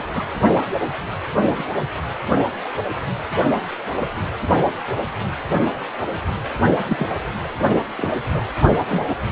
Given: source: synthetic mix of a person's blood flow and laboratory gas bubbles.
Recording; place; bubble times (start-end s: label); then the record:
Doppler ultrasound of blood flow; precordium
0.00-0.04 s: bubbles
0.14-0.22 s: bubbles
1.50-1.64 s: bubbles
6.88-7.14 s: bubbles
7.97-8.12 s: bubbles
8.35-8.42 s: bubbles
8.89-9.14 s: bubbles
From the record:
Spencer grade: 2 (many but less than half of the cardiac periods contain bubble signals, singularly or in groups); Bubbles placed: only in the low amplitude regions of the cardiac cycle